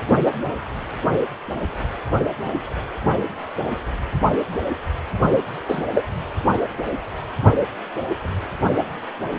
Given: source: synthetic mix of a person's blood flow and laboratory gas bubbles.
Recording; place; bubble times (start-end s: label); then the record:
Doppler ultrasound of blood flow; precordium
5.69-5.83 s: bubbles
5.95-6.04 s: bubbles
From the record:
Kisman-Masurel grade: 113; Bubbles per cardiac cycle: 1 to 2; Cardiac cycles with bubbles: 1 to 10%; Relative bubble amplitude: loud (0.450 to 0.775); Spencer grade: 1 (occasional bubble signal discernible with the cardiac motion signal, with majority of cardiac periods free of bubbles); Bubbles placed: only in the low amplitude regions of the cardiac cycle